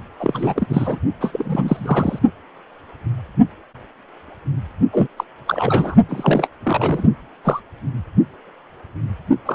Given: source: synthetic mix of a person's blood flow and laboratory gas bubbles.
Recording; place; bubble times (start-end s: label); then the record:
Doppler ultrasound of blood flow; precordium
0.19-0.99 s: bubbles
1.21-2.19 s: bubbles
4.92-5.07 s: bubbles
5.17-5.24 s: bubbles
5.47-5.95 s: bubbles
6.08-6.48 s: bubbles
6.63-7.08 s: bubbles
7.45-7.60 s: bubbles
9.46-9.55 s: bubbles
From the record:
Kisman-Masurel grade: 333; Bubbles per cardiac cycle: rolling drumbeat, 9 or more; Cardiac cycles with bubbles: 50 to 99%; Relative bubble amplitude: loud (0.450 to 0.775); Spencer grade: 3 (all of the cardiac periods contain showers or single bubble signals, but not dominating or overriding the cardiac motion signals); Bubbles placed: only in the low amplitude regions of the cardiac cycle